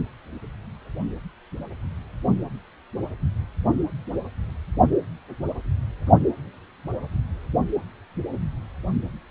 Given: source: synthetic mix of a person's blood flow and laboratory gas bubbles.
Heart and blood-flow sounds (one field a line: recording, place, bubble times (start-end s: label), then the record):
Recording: Doppler ultrasound of blood flow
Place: precordium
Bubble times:
no bubbles
From the record:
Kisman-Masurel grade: 000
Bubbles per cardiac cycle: 0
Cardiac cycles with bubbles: 0%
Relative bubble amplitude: no bubbles discernible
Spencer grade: 0 (complete lack of bubble signals)